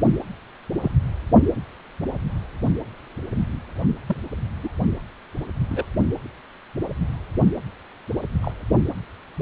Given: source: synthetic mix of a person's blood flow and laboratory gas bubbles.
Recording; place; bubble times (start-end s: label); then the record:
Doppler ultrasound of blood flow; precordium
0.82-0.91 s: bubbles
4.06-4.17 s: bubbles
4.63-4.69 s: bubbles
5.70-5.85 s: bubbles
8.42-8.52 s: bubbles
From the record:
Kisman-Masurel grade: 121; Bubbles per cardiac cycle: 1 to 2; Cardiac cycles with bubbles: 10 to 50%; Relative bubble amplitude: barely perceptible (0.100 to 0.250); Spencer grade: 2 (many but less than half of the cardiac periods contain bubble signals, singularly or in groups); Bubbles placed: only in the low amplitude regions of the cardiac cycle